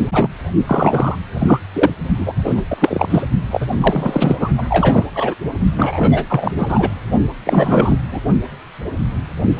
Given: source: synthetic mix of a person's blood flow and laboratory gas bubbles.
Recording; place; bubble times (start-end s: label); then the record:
Doppler ultrasound of blood flow; precordium
0.12-0.30 s: bubbles
0.66-1.15 s: bubbles
1.33-1.60 s: bubbles
1.73-1.90 s: bubbles
2.18-2.34 s: bubbles
2.44-2.61 s: bubbles
2.69-3.23 s: bubbles
3.51-3.67 s: bubbles
3.80-4.36 s: bubbles
4.39-4.49 s: bubbles
4.57-4.64 s: bubbles
4.69-5.05 s: bubbles
5.13-5.34 s: bubbles
5.76-6.54 s: bubbles
6.58-6.89 s: bubbles
7.45-7.97 s: bubbles
8.11-8.21 s: bubbles
From the record:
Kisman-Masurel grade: 333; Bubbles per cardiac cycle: rolling drumbeat, 9 or more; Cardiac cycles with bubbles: 50 to 99%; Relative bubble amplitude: loud (0.450 to 0.775); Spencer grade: 3 (all of the cardiac periods contain showers or single bubble signals, but not dominating or overriding the cardiac motion signals); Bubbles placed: only in the low amplitude regions of the cardiac cycle